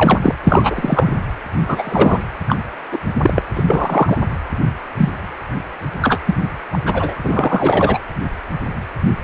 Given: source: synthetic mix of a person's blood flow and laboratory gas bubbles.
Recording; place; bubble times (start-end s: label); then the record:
Doppler ultrasound of blood flow; precordium
0.00-0.35 s: bubbles
0.43-1.11 s: bubbles
1.64-2.22 s: bubbles
2.48-2.57 s: bubbles
2.91-2.98 s: bubbles
3.21-3.42 s: bubbles
3.56-4.18 s: bubbles
4.97-5.09 s: bubbles
6.01-6.18 s: bubbles
6.26-6.34 s: bubbles
6.72-6.79 s: bubbles
6.85-7.17 s: bubbles
7.24-7.98 s: bubbles
From the record:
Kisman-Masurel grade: 233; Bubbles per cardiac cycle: several, 3 to 8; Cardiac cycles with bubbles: 50 to 99%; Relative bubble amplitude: loud (0.450 to 0.775); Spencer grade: 3 (all of the cardiac periods contain showers or single bubble signals, but not dominating or overriding the cardiac motion signals); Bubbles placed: anywhere in the cardiac cycle